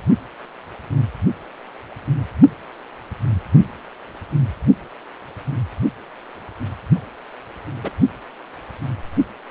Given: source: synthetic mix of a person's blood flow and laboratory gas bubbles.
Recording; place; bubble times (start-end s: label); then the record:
Doppler ultrasound of blood flow; precordium
7.83-7.90 s: bubbles
From the record:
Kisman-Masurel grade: 112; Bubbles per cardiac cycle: 1 to 2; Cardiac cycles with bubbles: 1 to 10%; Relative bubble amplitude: moderate (0.250 to 0.450); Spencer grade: 1 (occasional bubble signal discernible with the cardiac motion signal, with majority of cardiac periods free of bubbles); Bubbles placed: only in the low amplitude regions of the cardiac cycle